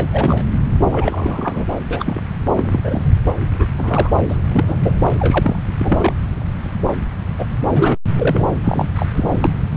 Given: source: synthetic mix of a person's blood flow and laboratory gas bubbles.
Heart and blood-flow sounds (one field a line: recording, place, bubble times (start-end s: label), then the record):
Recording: Doppler ultrasound of blood flow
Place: subclavian vein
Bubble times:
0.00-0.45 s: bubbles
0.91-1.66 s: bubbles
1.89-2.21 s: bubbles
2.55-3.14 s: bubbles
3.56-3.66 s: bubbles
3.78-4.10 s: bubbles
4.29-4.38 s: bubbles
4.53-4.78 s: bubbles
4.83-4.93 s: bubbles
5.19-5.58 s: bubbles
5.78-6.15 s: bubbles
7.38-7.46 s: bubbles
7.74-7.98 s: bubbles
8.18-8.47 s: bubbles
8.64-8.89 s: bubbles
8.95-9.06 s: bubbles
9.13-9.38 s: bubbles
9.42-9.50 s: bubbles
From the record:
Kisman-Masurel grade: 332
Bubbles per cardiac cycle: rolling drumbeat, 9 or more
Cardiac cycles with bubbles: 50 to 99%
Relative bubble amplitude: moderate (0.250 to 0.450)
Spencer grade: 3 (all of the cardiac periods contain showers or single bubble signals, but not dominating or overriding the cardiac motion signals)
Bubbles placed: anywhere in the cardiac cycle